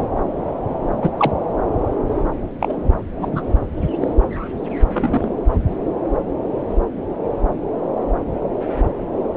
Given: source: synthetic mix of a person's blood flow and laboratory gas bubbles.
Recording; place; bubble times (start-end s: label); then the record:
Doppler ultrasound of blood flow; subclavian vein
1.01-1.11 s: bubbles
1.17-1.31 s: bubbles
2.59-2.77 s: bubbles
3.21-3.42 s: bubbles
4.01-4.08 s: bubbles
4.92-5.29 s: bubbles
From the record:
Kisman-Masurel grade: 123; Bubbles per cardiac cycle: 1 to 2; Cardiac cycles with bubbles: 10 to 50%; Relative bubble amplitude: loud (0.450 to 0.775); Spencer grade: 2 (many but less than half of the cardiac periods contain bubble signals, singularly or in groups); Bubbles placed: anywhere in the cardiac cycle